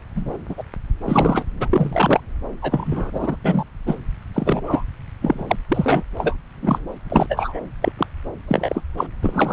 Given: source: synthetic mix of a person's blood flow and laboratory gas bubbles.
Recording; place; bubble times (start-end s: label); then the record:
Doppler ultrasound of blood flow; subclavian vein
0.16-0.37 s: bubbles
0.48-0.63 s: bubbles
1.02-1.45 s: bubbles
1.60-1.69 s: bubbles
1.73-2.21 s: bubbles
2.62-3.11 s: bubbles
3.13-3.37 s: bubbles
3.44-3.64 s: bubbles
3.86-3.96 s: bubbles
4.33-4.62 s: bubbles
4.66-4.84 s: bubbles
5.21-5.56 s: bubbles
5.68-6.04 s: bubbles
6.17-6.36 s: bubbles
6.62-6.86 s: bubbles
7.10-7.26 s: bubbles
7.29-7.60 s: bubbles
7.81-7.92 s: bubbles
7.97-8.06 s: bubbles
8.47-8.82 s: bubbles
8.97-9.06 s: bubbles
9.22-9.53 s: bubbles
From the record:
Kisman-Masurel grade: 243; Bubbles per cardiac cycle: several, 3 to 8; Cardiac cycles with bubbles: 100%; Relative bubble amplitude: loud (0.450 to 0.775); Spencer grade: 3 (all of the cardiac periods contain showers or single bubble signals, but not dominating or overriding the cardiac motion signals); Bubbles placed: anywhere in the cardiac cycle